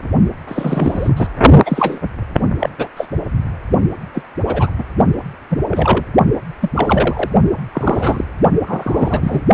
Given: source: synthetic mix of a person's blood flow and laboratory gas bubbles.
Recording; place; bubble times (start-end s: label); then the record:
Doppler ultrasound of blood flow; precordium
0.47-1.26 s: bubbles
1.66-1.99 s: bubbles
2.59-2.70 s: bubbles
2.78-2.88 s: bubbles
2.97-3.06 s: bubbles
4.14-4.23 s: bubbles
4.47-4.71 s: bubbles
4.78-4.84 s: bubbles
5.50-5.60 s: bubbles
5.69-6.04 s: bubbles
6.62-6.70 s: bubbles
6.75-7.30 s: bubbles
7.72-8.25 s: bubbles
8.67-9.40 s: bubbles
From the record:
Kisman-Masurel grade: 243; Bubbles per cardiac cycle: several, 3 to 8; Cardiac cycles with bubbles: 100%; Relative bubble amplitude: loud (0.450 to 0.775); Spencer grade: 3 (all of the cardiac periods contain showers or single bubble signals, but not dominating or overriding the cardiac motion signals); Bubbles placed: only in the low amplitude regions of the cardiac cycle